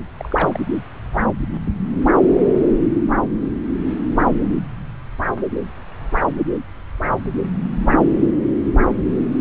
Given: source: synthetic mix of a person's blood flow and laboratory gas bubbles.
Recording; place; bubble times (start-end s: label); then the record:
Doppler ultrasound of blood flow; subclavian vein
0.18-0.59 s: bubbles
From the record:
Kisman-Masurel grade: 111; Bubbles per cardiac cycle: 1 to 2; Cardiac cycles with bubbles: 1 to 10%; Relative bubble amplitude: barely perceptible (0.100 to 0.250); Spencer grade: 1 (occasional bubble signal discernible with the cardiac motion signal, with majority of cardiac periods free of bubbles); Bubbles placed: anywhere in the cardiac cycle